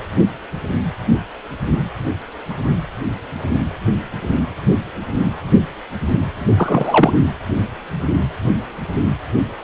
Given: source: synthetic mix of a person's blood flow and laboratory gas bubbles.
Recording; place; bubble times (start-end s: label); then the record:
Doppler ultrasound of blood flow; precordium
6.57-7.13 s: bubbles
From the record:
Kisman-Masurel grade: 213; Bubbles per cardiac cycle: several, 3 to 8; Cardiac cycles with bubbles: 1 to 10%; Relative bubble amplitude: loud (0.450 to 0.775); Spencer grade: 1 (occasional bubble signal discernible with the cardiac motion signal, with majority of cardiac periods free of bubbles); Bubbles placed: anywhere in the cardiac cycle